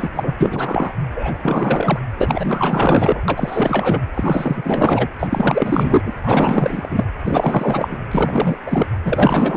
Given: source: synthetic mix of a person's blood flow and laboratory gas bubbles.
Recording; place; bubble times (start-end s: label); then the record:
Doppler ultrasound of blood flow; precordium
0.00-0.09 s: bubbles
0.14-0.92 s: bubbles
1.15-1.36 s: bubbles
1.45-2.00 s: bubbles
2.17-3.24 s: bubbles
3.28-4.02 s: bubbles
4.14-5.08 s: bubbles
5.19-6.12 s: bubbles
6.23-7.04 s: bubbles
7.24-7.98 s: bubbles
8.11-8.57 s: bubbles
8.66-8.86 s: bubbles
9.04-9.57 s: bubbles
From the record:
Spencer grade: 4 (maximum detectable bubble signal sounding continuously throughout systole and diastole of every cardiac period, and overriding the amplitude of the normal cardiac signals); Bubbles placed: anywhere in the cardiac cycle